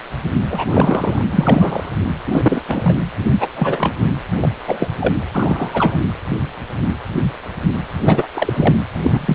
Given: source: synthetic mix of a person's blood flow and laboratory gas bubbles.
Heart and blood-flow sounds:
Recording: Doppler ultrasound of blood flow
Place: precordium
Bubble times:
0.50-1.24 s: bubbles
1.32-1.91 s: bubbles
2.24-2.62 s: bubbles
2.68-3.10 s: bubbles
3.40-3.48 s: bubbles
3.55-3.94 s: bubbles
4.41-4.49 s: bubbles
4.67-4.88 s: bubbles
5.00-5.13 s: bubbles
5.33-6.00 s: bubbles
8.05-8.28 s: bubbles
8.34-8.75 s: bubbles
9.03-9.35 s: bubbles
From the record:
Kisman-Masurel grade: 233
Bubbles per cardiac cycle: several, 3 to 8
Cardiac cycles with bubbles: 50 to 99%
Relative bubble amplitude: loud (0.450 to 0.775)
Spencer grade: 3 (all of the cardiac periods contain showers or single bubble signals, but not dominating or overriding the cardiac motion signals)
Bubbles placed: anywhere in the cardiac cycle

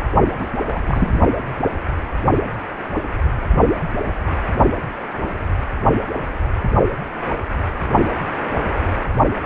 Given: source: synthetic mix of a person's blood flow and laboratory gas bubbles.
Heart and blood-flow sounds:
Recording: Doppler ultrasound of blood flow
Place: precordium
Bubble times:
0.38-0.47 s: bubbles
0.67-1.20 s: bubbles
From the record:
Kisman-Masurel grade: 212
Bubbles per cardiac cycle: several, 3 to 8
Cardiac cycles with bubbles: 1 to 10%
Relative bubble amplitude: moderate (0.250 to 0.450)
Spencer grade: 1 (occasional bubble signal discernible with the cardiac motion signal, with majority of cardiac periods free of bubbles)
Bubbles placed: only in the low amplitude regions of the cardiac cycle

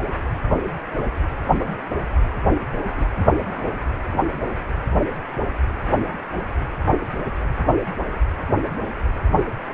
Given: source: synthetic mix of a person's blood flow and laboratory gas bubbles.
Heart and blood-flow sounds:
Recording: Doppler ultrasound of blood flow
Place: precordium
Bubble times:
2.89-3.72 s: bubbles
4.12-4.21 s: bubbles
From the record:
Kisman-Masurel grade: 211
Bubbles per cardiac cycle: several, 3 to 8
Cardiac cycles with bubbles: 1 to 10%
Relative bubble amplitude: barely perceptible (0.100 to 0.250)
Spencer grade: 1 (occasional bubble signal discernible with the cardiac motion signal, with majority of cardiac periods free of bubbles)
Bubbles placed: anywhere in the cardiac cycle

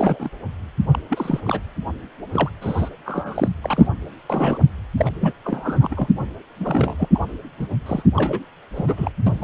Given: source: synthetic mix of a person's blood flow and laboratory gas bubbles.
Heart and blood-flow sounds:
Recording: Doppler ultrasound of blood flow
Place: precordium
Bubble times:
0.00-0.29 s: bubbles
0.91-0.99 s: bubbles
1.09-1.40 s: bubbles
1.45-1.61 s: bubbles
2.33-2.50 s: bubbles
2.61-2.89 s: bubbles
3.05-3.49 s: bubbles
3.62-3.87 s: bubbles
4.29-4.58 s: bubbles
4.96-5.10 s: bubbles
5.21-5.33 s: bubbles
5.44-6.08 s: bubbles
6.60-6.96 s: bubbles
6.98-7.08 s: bubbles
7.15-7.19 s: bubbles
7.60-7.67 s: bubbles
7.86-8.03 s: bubbles
8.16-8.39 s: bubbles
8.75-9.11 s: bubbles
9.26-9.44 s: bubbles
From the record:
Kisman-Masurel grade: 342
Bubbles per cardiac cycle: rolling drumbeat, 9 or more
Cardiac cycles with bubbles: 100%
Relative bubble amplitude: moderate (0.250 to 0.450)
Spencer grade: 3 (all of the cardiac periods contain showers or single bubble signals, but not dominating or overriding the cardiac motion signals)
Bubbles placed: anywhere in the cardiac cycle

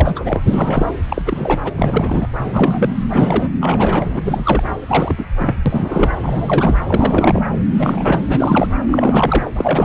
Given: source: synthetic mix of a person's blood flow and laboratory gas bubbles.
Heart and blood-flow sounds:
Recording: Doppler ultrasound of blood flow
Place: subclavian vein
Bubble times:
0.00-0.41 s: bubbles
0.47-0.85 s: bubbles
1.08-1.22 s: bubbles
1.25-1.60 s: bubbles
1.64-1.72 s: bubbles
1.76-2.27 s: bubbles
2.35-2.94 s: bubbles
3.10-3.52 s: bubbles
3.60-4.20 s: bubbles
4.25-4.63 s: bubbles
4.88-5.15 s: bubbles
5.17-5.25 s: bubbles
5.38-5.55 s: bubbles
5.66-6.17 s: bubbles
6.22-6.76 s: bubbles
6.88-7.58 s: bubbles
7.79-8.21 s: bubbles
8.28-8.68 s: bubbles
8.87-9.51 s: bubbles
9.56-9.85 s: bubbles
From the record:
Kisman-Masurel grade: 343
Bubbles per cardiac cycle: rolling drumbeat, 9 or more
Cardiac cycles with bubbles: 100%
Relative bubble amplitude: loud (0.450 to 0.775)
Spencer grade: 3 (all of the cardiac periods contain showers or single bubble signals, but not dominating or overriding the cardiac motion signals)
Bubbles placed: anywhere in the cardiac cycle

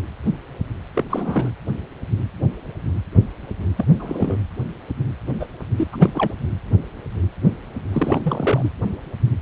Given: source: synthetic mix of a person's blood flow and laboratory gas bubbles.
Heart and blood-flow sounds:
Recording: Doppler ultrasound of blood flow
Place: precordium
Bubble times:
0.95-1.04 s: bubbles
1.10-1.50 s: bubbles
3.77-3.85 s: bubbles
3.99-4.38 s: bubbles
5.40-5.46 s: bubbles
5.77-5.88 s: bubbles
5.92-6.10 s: bubbles
6.15-6.33 s: bubbles
7.92-8.21 s: bubbles
8.24-8.69 s: bubbles
From the record:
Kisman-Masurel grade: 222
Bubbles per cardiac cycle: several, 3 to 8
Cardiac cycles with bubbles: 10 to 50%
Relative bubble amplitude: moderate (0.250 to 0.450)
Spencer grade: 2 (many but less than half of the cardiac periods contain bubble signals, singularly or in groups)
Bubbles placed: anywhere in the cardiac cycle

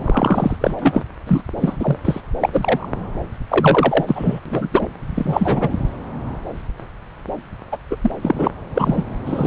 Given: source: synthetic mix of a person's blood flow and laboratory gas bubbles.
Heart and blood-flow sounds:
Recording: Doppler ultrasound of blood flow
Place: subclavian vein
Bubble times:
0.01-0.56 s: bubbles
0.60-0.75 s: bubbles
0.78-1.03 s: bubbles
1.27-1.42 s: bubbles
1.61-1.76 s: bubbles
1.80-1.97 s: bubbles
2.04-2.21 s: bubbles
2.41-2.49 s: bubbles
2.53-2.88 s: bubbles
3.48-4.05 s: bubbles
4.08-4.40 s: bubbles
4.46-4.69 s: bubbles
4.71-4.87 s: bubbles
5.15-5.76 s: bubbles
7.72-7.77 s: bubbles
7.90-7.96 s: bubbles
8.01-8.12 s: bubbles
8.21-8.51 s: bubbles
8.75-9.02 s: bubbles
9.26-9.47 s: bubbles
From the record:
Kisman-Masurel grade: 233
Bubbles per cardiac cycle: several, 3 to 8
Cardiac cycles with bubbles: 50 to 99%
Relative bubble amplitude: loud (0.450 to 0.775)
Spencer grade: 3 (all of the cardiac periods contain showers or single bubble signals, but not dominating or overriding the cardiac motion signals)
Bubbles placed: anywhere in the cardiac cycle

